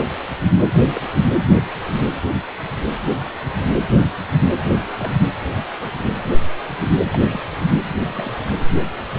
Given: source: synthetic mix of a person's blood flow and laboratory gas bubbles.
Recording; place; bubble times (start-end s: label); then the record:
Doppler ultrasound of blood flow; precordium
0.92-1.01 s: bubbles
1.28-1.36 s: bubbles
4.64-4.74 s: bubbles
4.97-5.12 s: bubbles
5.80-5.88 s: bubbles
7.06-7.19 s: bubbles
7.29-7.44 s: bubbles
8.06-8.38 s: bubbles
From the record:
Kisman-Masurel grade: 121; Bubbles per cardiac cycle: 1 to 2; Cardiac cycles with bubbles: 10 to 50%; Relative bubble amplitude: barely perceptible (0.100 to 0.250); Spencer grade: 2 (many but less than half of the cardiac periods contain bubble signals, singularly or in groups); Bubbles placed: anywhere in the cardiac cycle